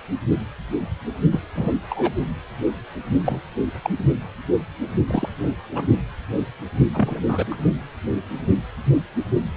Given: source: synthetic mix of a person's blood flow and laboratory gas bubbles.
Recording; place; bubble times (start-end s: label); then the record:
Doppler ultrasound of blood flow; precordium
1.32-1.40 s: bubbles
1.55-1.73 s: bubbles
1.90-2.13 s: bubbles
3.21-3.40 s: bubbles
3.84-3.90 s: bubbles
5.07-5.29 s: bubbles
5.74-5.86 s: bubbles
6.94-7.21 s: bubbles
7.28-7.45 s: bubbles
7.51-7.56 s: bubbles
From the record:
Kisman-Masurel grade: 222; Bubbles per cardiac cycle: several, 3 to 8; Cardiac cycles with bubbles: 10 to 50%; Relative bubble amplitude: moderate (0.250 to 0.450); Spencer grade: 2 (many but less than half of the cardiac periods contain bubble signals, singularly or in groups); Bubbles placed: only in the low amplitude regions of the cardiac cycle